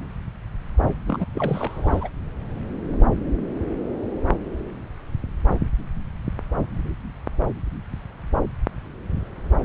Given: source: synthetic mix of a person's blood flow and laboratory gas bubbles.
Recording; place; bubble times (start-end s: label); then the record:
Doppler ultrasound of blood flow; subclavian vein
1.07-1.25 s: bubbles
1.33-2.09 s: bubbles
From the record:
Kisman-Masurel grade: 211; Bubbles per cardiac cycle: several, 3 to 8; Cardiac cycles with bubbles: 1 to 10%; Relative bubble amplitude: barely perceptible (0.100 to 0.250); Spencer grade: 1 (occasional bubble signal discernible with the cardiac motion signal, with majority of cardiac periods free of bubbles); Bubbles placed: anywhere in the cardiac cycle